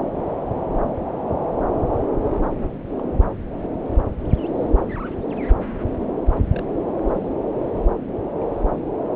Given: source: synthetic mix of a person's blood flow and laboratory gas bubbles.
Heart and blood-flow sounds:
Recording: Doppler ultrasound of blood flow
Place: subclavian vein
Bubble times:
2.54-2.79 s: bubbles
2.98-3.01 s: bubbles
6.50-6.63 s: bubbles
7.03-7.34 s: bubbles
From the record:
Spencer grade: 2 (many but less than half of the cardiac periods contain bubble signals, singularly or in groups)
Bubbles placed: anywhere in the cardiac cycle

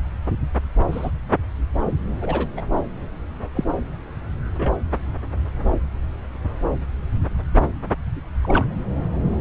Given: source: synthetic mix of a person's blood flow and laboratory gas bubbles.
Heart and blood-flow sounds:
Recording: Doppler ultrasound of blood flow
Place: subclavian vein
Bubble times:
0.92-1.10 s: bubbles
2.21-2.48 s: bubbles
2.56-2.65 s: bubbles
3.55-3.65 s: bubbles
4.44-4.74 s: bubbles
8.42-8.75 s: bubbles
From the record:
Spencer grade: 2 (many but less than half of the cardiac periods contain bubble signals, singularly or in groups)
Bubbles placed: anywhere in the cardiac cycle

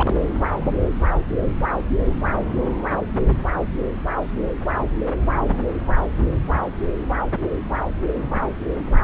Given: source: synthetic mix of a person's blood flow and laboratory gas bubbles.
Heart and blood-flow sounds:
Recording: Doppler ultrasound of blood flow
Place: subclavian vein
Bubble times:
0.00-0.14 s: bubbles
From the record:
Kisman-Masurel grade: 123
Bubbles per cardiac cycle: 1 to 2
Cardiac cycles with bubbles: 10 to 50%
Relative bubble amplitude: loud (0.450 to 0.775)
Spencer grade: 2 (many but less than half of the cardiac periods contain bubble signals, singularly or in groups)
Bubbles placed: anywhere in the cardiac cycle

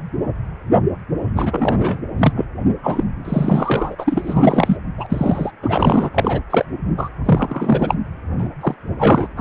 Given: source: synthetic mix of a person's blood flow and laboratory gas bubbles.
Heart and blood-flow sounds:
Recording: Doppler ultrasound of blood flow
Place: precordium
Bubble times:
1.34-2.02 s: bubbles
2.19-2.33 s: bubbles
2.35-2.45 s: bubbles
2.83-3.04 s: bubbles
3.25-3.95 s: bubbles
3.98-4.77 s: bubbles
4.98-5.06 s: bubbles
5.09-5.52 s: bubbles
5.62-6.10 s: bubbles
6.14-6.41 s: bubbles
6.50-6.65 s: bubbles
6.97-7.10 s: bubbles
7.25-7.95 s: bubbles
8.38-8.48 s: bubbles
8.61-8.74 s: bubbles
8.98-9.28 s: bubbles
9.37-9.41 s: bubbles
From the record:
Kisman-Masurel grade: 333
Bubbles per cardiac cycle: rolling drumbeat, 9 or more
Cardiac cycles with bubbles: 50 to 99%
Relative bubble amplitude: loud (0.450 to 0.775)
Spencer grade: 3 (all of the cardiac periods contain showers or single bubble signals, but not dominating or overriding the cardiac motion signals)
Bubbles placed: anywhere in the cardiac cycle

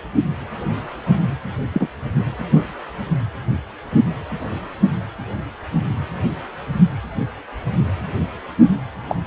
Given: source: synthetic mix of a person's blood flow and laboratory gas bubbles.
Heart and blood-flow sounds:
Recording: Doppler ultrasound of blood flow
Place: precordium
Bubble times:
1.74-1.88 s: bubbles
9.09-9.16 s: bubbles
From the record:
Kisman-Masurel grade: 123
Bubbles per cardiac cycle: 1 to 2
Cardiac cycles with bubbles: 10 to 50%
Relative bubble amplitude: loud (0.450 to 0.775)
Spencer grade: 2 (many but less than half of the cardiac periods contain bubble signals, singularly or in groups)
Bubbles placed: anywhere in the cardiac cycle

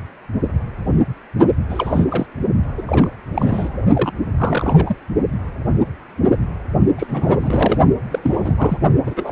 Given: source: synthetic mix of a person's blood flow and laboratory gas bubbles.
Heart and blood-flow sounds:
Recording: Doppler ultrasound of blood flow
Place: precordium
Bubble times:
1.69-2.06 s: bubbles
2.08-2.26 s: bubbles
2.77-2.82 s: bubbles
2.87-3.10 s: bubbles
3.34-3.77 s: bubbles
3.93-4.13 s: bubbles
4.37-4.95 s: bubbles
6.98-7.78 s: bubbles
8.11-8.78 s: bubbles
9.06-9.32 s: bubbles
From the record:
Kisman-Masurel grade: 332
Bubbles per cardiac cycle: rolling drumbeat, 9 or more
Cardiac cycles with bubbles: 50 to 99%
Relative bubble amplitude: moderate (0.250 to 0.450)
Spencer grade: 3 (all of the cardiac periods contain showers or single bubble signals, but not dominating or overriding the cardiac motion signals)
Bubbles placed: only in the low amplitude regions of the cardiac cycle

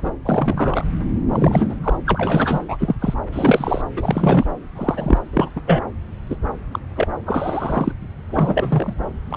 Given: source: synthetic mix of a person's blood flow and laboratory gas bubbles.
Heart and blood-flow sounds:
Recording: Doppler ultrasound of blood flow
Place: subclavian vein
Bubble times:
0.00-0.11 s: bubbles
0.25-0.86 s: bubbles
1.32-1.76 s: bubbles
1.83-1.97 s: bubbles
2.06-2.60 s: bubbles
2.68-2.96 s: bubbles
3.00-3.15 s: bubbles
3.33-3.82 s: bubbles
3.96-4.45 s: bubbles
4.75-5.19 s: bubbles
5.33-5.50 s: bubbles
5.56-5.61 s: bubbles
5.67-5.83 s: bubbles
6.29-6.36 s: bubbles
6.71-6.79 s: bubbles
6.96-7.08 s: bubbles
7.25-7.92 s: bubbles
8.30-8.93 s: bubbles
9.30-9.37 s: bubbles
From the record:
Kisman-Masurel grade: 243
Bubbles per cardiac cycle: several, 3 to 8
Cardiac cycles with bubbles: 100%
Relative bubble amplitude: loud (0.450 to 0.775)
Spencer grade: 3 (all of the cardiac periods contain showers or single bubble signals, but not dominating or overriding the cardiac motion signals)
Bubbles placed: anywhere in the cardiac cycle

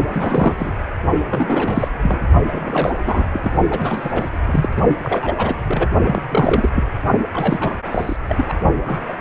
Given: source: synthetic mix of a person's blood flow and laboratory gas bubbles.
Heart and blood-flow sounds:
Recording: Doppler ultrasound of blood flow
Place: precordium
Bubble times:
0.07-0.73 s: bubbles
1.30-1.88 s: bubbles
2.02-2.17 s: bubbles
2.52-2.92 s: bubbles
3.05-3.29 s: bubbles
3.32-3.41 s: bubbles
3.43-3.52 s: bubbles
3.70-4.29 s: bubbles
4.45-4.69 s: bubbles
5.03-5.34 s: bubbles
5.37-5.87 s: bubbles
6.05-6.22 s: bubbles
6.29-6.70 s: bubbles
6.75-6.83 s: bubbles
7.33-7.73 s: bubbles
7.85-8.16 s: bubbles
8.27-8.45 s: bubbles
8.48-8.54 s: bubbles
8.85-9.01 s: bubbles
9.08-9.15 s: bubbles
9.18-9.21 s: bubbles
From the record:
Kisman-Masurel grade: 342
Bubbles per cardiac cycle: rolling drumbeat, 9 or more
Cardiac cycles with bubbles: 100%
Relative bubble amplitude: moderate (0.250 to 0.450)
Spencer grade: 3 (all of the cardiac periods contain showers or single bubble signals, but not dominating or overriding the cardiac motion signals)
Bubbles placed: only in the low amplitude regions of the cardiac cycle

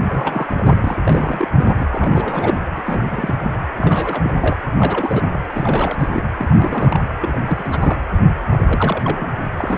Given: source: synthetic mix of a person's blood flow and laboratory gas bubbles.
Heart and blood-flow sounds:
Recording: Doppler ultrasound of blood flow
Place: precordium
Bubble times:
0.07-1.00 s: bubbles
1.03-1.48 s: bubbles
1.57-1.87 s: bubbles
1.91-2.60 s: bubbles
2.76-2.83 s: bubbles
2.87-3.53 s: bubbles
3.78-4.21 s: bubbles
4.23-4.37 s: bubbles
4.39-4.57 s: bubbles
4.77-5.39 s: bubbles
5.50-6.26 s: bubbles
6.38-6.47 s: bubbles
6.50-7.14 s: bubbles
7.21-8.00 s: bubbles
8.51-9.31 s: bubbles
9.58-9.78 s: bubbles
From the record:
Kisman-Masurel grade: 342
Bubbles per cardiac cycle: rolling drumbeat, 9 or more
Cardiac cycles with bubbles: 100%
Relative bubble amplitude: moderate (0.250 to 0.450)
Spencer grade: 3 (all of the cardiac periods contain showers or single bubble signals, but not dominating or overriding the cardiac motion signals)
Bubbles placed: anywhere in the cardiac cycle

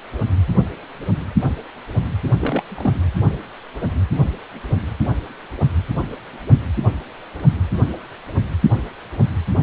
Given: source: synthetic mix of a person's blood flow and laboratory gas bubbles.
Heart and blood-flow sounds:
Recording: Doppler ultrasound of blood flow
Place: precordium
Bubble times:
2.40-2.63 s: bubbles
2.70-2.93 s: bubbles
From the record:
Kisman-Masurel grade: 212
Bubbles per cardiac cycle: several, 3 to 8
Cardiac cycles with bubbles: 1 to 10%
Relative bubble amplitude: moderate (0.250 to 0.450)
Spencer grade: 1 (occasional bubble signal discernible with the cardiac motion signal, with majority of cardiac periods free of bubbles)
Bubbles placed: only in the low amplitude regions of the cardiac cycle

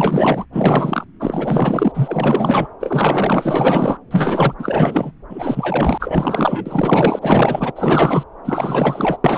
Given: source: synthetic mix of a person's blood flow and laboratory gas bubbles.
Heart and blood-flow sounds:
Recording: Doppler ultrasound of blood flow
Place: subclavian vein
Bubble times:
0.00-0.46 s: bubbles
0.52-1.05 s: bubbles
1.20-2.68 s: bubbles
2.80-3.97 s: bubbles
4.10-4.54 s: bubbles
4.58-5.11 s: bubbles
5.29-7.72 s: bubbles
7.75-8.24 s: bubbles
8.45-9.17 s: bubbles
9.24-9.38 s: bubbles
From the record:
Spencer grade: 4 (maximum detectable bubble signal sounding continuously throughout systole and diastole of every cardiac period, and overriding the amplitude of the normal cardiac signals)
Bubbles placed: anywhere in the cardiac cycle

